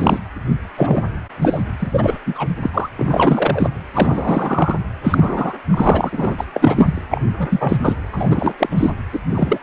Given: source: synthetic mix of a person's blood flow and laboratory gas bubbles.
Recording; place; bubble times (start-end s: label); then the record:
Doppler ultrasound of blood flow; precordium
0.00-0.19 s: bubbles
0.74-1.04 s: bubbles
1.42-1.64 s: bubbles
1.79-1.87 s: bubbles
1.91-2.19 s: bubbles
2.26-2.47 s: bubbles
2.62-2.70 s: bubbles
2.73-2.89 s: bubbles
2.98-3.71 s: bubbles
3.93-4.79 s: bubbles
5.03-5.54 s: bubbles
5.69-6.45 s: bubbles
6.54-7.04 s: bubbles
7.11-7.21 s: bubbles
7.38-7.77 s: bubbles
7.83-7.96 s: bubbles
8.12-8.55 s: bubbles
8.59-8.90 s: bubbles
9.12-9.20 s: bubbles
9.34-9.58 s: bubbles
From the record:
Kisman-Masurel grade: 343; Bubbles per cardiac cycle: rolling drumbeat, 9 or more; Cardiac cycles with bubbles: 100%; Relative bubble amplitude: loud (0.450 to 0.775); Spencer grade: 3 (all of the cardiac periods contain showers or single bubble signals, but not dominating or overriding the cardiac motion signals); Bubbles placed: anywhere in the cardiac cycle